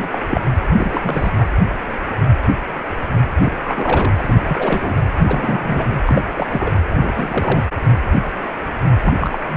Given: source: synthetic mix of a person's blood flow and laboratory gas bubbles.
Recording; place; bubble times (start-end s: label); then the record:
Doppler ultrasound of blood flow; precordium
0.00-0.09 s: bubbles
0.12-0.19 s: bubbles
0.30-0.43 s: bubbles
0.77-1.30 s: bubbles
1.36-1.45 s: bubbles
3.40-3.52 s: bubbles
3.64-4.25 s: bubbles
4.27-4.34 s: bubbles
4.49-4.95 s: bubbles
5.18-5.85 s: bubbles
6.05-6.23 s: bubbles
6.38-6.47 s: bubbles
6.50-6.73 s: bubbles
6.88-7.68 s: bubbles
9.04-9.38 s: bubbles
9.49-9.57 s: bubbles
From the record:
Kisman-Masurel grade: 332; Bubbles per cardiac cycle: rolling drumbeat, 9 or more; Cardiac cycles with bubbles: 50 to 99%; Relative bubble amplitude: moderate (0.250 to 0.450); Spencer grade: 3 (all of the cardiac periods contain showers or single bubble signals, but not dominating or overriding the cardiac motion signals); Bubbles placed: anywhere in the cardiac cycle